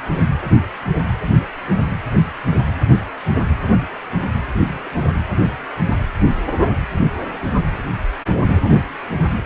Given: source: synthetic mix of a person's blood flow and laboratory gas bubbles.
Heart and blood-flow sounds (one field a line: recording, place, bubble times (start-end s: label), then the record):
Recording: Doppler ultrasound of blood flow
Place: precordium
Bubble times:
4.69-4.94 s: bubbles
From the record:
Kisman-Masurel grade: 111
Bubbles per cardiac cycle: 1 to 2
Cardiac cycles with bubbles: 1 to 10%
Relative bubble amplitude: barely perceptible (0.100 to 0.250)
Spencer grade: 1 (occasional bubble signal discernible with the cardiac motion signal, with majority of cardiac periods free of bubbles)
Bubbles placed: anywhere in the cardiac cycle